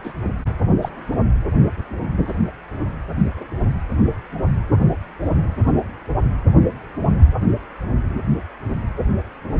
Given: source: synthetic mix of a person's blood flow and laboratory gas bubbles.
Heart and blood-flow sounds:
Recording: Doppler ultrasound of blood flow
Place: precordium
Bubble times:
0.04-0.14 s: bubbles
0.81-0.89 s: bubbles
2.25-2.33 s: bubbles
From the record:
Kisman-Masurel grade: 122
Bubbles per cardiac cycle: 1 to 2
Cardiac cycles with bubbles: 10 to 50%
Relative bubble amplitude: moderate (0.250 to 0.450)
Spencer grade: 2 (many but less than half of the cardiac periods contain bubble signals, singularly or in groups)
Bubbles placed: anywhere in the cardiac cycle

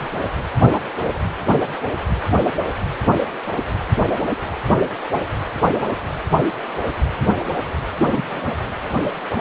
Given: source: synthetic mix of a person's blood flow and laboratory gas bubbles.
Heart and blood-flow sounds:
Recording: Doppler ultrasound of blood flow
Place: precordium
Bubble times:
8.06-8.42 s: bubbles
From the record:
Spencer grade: 1 (occasional bubble signal discernible with the cardiac motion signal, with majority of cardiac periods free of bubbles)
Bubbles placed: anywhere in the cardiac cycle

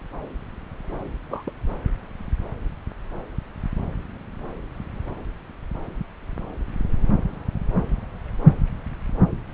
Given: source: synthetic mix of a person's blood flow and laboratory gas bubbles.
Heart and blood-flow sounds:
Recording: Doppler ultrasound of blood flow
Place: subclavian vein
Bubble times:
1.28-1.52 s: bubbles
From the record:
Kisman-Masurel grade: 211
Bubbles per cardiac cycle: several, 3 to 8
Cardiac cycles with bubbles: 1 to 10%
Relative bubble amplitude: barely perceptible (0.100 to 0.250)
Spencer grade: 1 (occasional bubble signal discernible with the cardiac motion signal, with majority of cardiac periods free of bubbles)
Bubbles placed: anywhere in the cardiac cycle

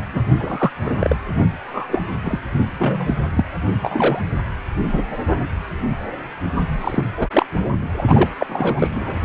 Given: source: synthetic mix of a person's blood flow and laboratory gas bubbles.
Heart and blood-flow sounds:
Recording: Doppler ultrasound of blood flow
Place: precordium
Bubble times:
0.14-0.24 s: bubbles
0.37-0.72 s: bubbles
0.85-1.15 s: bubbles
1.63-2.04 s: bubbles
2.25-2.40 s: bubbles
2.77-3.14 s: bubbles
3.35-3.44 s: bubbles
3.82-4.20 s: bubbles
4.85-5.03 s: bubbles
6.81-7.04 s: bubbles
7.17-7.28 s: bubbles
7.33-7.46 s: bubbles
7.97-8.04 s: bubbles
8.07-8.29 s: bubbles
8.38-8.88 s: bubbles
8.95-9.21 s: bubbles
From the record:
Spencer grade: 3 (all of the cardiac periods contain showers or single bubble signals, but not dominating or overriding the cardiac motion signals)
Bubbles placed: only in the low amplitude regions of the cardiac cycle

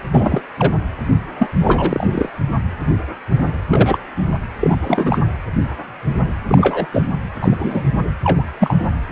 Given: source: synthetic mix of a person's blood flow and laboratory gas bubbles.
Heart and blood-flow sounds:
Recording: Doppler ultrasound of blood flow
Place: precordium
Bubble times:
0.11-0.41 s: bubbles
0.57-0.72 s: bubbles
1.38-1.47 s: bubbles
1.60-2.07 s: bubbles
2.12-2.29 s: bubbles
3.69-3.98 s: bubbles
4.60-4.77 s: bubbles
4.81-5.18 s: bubbles
6.47-6.86 s: bubbles
6.92-7.11 s: bubbles
7.42-7.88 s: bubbles
8.23-8.44 s: bubbles
8.59-8.76 s: bubbles
9.08-9.12 s: bubbles
From the record:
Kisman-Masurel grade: 233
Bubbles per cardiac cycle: several, 3 to 8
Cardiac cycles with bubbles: 50 to 99%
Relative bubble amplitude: loud (0.450 to 0.775)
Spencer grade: 3 (all of the cardiac periods contain showers or single bubble signals, but not dominating or overriding the cardiac motion signals)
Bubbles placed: anywhere in the cardiac cycle

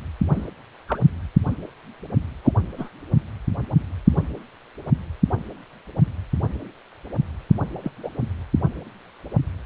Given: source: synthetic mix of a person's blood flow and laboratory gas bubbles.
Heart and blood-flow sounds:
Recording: Doppler ultrasound of blood flow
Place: precordium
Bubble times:
0.33-0.47 s: bubbles
0.88-0.99 s: bubbles
2.44-2.52 s: bubbles
2.78-2.89 s: bubbles
7.83-7.92 s: bubbles
8.03-8.09 s: bubbles
From the record:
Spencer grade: 2 (many but less than half of the cardiac periods contain bubble signals, singularly or in groups)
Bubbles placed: anywhere in the cardiac cycle

